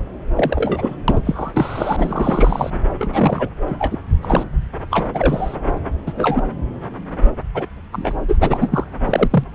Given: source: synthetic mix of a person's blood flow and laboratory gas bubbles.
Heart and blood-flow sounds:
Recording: Doppler ultrasound of blood flow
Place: subclavian vein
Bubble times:
0.36-0.96 s: bubbles
1.08-1.22 s: bubbles
1.25-2.70 s: bubbles
2.99-3.50 s: bubbles
3.67-3.75 s: bubbles
3.79-3.99 s: bubbles
4.22-4.43 s: bubbles
4.89-5.09 s: bubbles
5.14-5.56 s: bubbles
6.06-6.42 s: bubbles
7.54-7.66 s: bubbles
7.92-8.12 s: bubbles
8.28-8.38 s: bubbles
8.40-8.84 s: bubbles
9.06-9.44 s: bubbles
From the record:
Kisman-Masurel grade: 242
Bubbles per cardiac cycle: several, 3 to 8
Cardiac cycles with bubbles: 100%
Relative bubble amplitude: moderate (0.250 to 0.450)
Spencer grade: 3 (all of the cardiac periods contain showers or single bubble signals, but not dominating or overriding the cardiac motion signals)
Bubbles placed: anywhere in the cardiac cycle

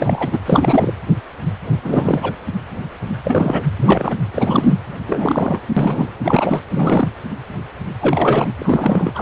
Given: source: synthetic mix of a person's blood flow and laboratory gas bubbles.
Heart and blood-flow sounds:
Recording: Doppler ultrasound of blood flow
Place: precordium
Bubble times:
0.00-0.39 s: bubbles
0.46-0.94 s: bubbles
1.83-2.33 s: bubbles
3.24-3.64 s: bubbles
3.79-4.15 s: bubbles
4.34-4.78 s: bubbles
5.07-5.60 s: bubbles
5.76-6.08 s: bubbles
6.24-6.60 s: bubbles
6.70-7.08 s: bubbles
8.01-8.54 s: bubbles
8.60-9.12 s: bubbles
9.15-9.22 s: bubbles
From the record:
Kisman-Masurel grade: 333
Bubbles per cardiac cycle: rolling drumbeat, 9 or more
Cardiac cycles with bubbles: 50 to 99%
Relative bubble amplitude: loud (0.450 to 0.775)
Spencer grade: 3 (all of the cardiac periods contain showers or single bubble signals, but not dominating or overriding the cardiac motion signals)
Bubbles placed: anywhere in the cardiac cycle

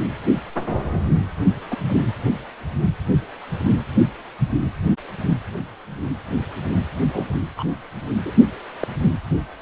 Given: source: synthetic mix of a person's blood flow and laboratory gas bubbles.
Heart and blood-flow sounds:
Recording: Doppler ultrasound of blood flow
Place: precordium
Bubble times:
1.70-1.77 s: bubbles
1.88-2.00 s: bubbles
7.09-7.25 s: bubbles
7.57-7.64 s: bubbles
8.26-8.32 s: bubbles
8.80-8.88 s: bubbles
From the record:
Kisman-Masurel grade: 122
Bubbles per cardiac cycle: 1 to 2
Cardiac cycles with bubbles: 10 to 50%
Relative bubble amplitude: moderate (0.250 to 0.450)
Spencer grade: 2 (many but less than half of the cardiac periods contain bubble signals, singularly or in groups)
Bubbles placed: anywhere in the cardiac cycle

